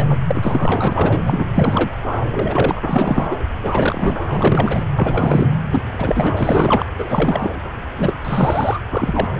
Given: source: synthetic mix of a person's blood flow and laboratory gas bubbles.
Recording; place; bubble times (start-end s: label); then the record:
Doppler ultrasound of blood flow; subclavian vein
0.00-0.17 s: bubbles
0.28-1.22 s: bubbles
1.26-1.45 s: bubbles
1.54-1.98 s: bubbles
2.31-2.81 s: bubbles
2.84-3.35 s: bubbles
3.63-4.87 s: bubbles
4.96-5.51 s: bubbles
5.70-6.32 s: bubbles
6.37-6.84 s: bubbles
6.98-7.51 s: bubbles
7.98-8.13 s: bubbles
8.25-8.79 s: bubbles
8.90-9.28 s: bubbles
From the record:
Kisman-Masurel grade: 342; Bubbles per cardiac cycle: rolling drumbeat, 9 or more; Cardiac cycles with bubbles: 100%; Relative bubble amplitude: moderate (0.250 to 0.450); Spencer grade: 3 (all of the cardiac periods contain showers or single bubble signals, but not dominating or overriding the cardiac motion signals); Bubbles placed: anywhere in the cardiac cycle